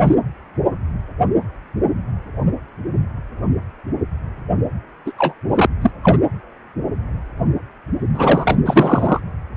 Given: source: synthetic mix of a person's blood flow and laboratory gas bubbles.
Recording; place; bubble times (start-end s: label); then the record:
Doppler ultrasound of blood flow; precordium
0.04-0.15 s: bubbles
5.05-5.12 s: bubbles
5.18-5.33 s: bubbles
5.54-5.67 s: bubbles
5.82-5.91 s: bubbles
6.03-6.19 s: bubbles
8.13-8.55 s: bubbles
8.65-9.20 s: bubbles
From the record:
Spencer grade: 2 (many but less than half of the cardiac periods contain bubble signals, singularly or in groups); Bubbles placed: anywhere in the cardiac cycle